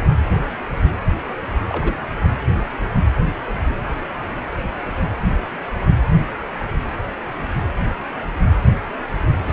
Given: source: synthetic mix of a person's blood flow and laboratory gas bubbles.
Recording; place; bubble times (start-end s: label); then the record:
Doppler ultrasound of blood flow; precordium
1.67-1.96 s: bubbles
9.46-9.53 s: bubbles
From the record:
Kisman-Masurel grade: 221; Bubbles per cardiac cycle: several, 3 to 8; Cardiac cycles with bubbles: 10 to 50%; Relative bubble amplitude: barely perceptible (0.100 to 0.250); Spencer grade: 2 (many but less than half of the cardiac periods contain bubble signals, singularly or in groups); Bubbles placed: anywhere in the cardiac cycle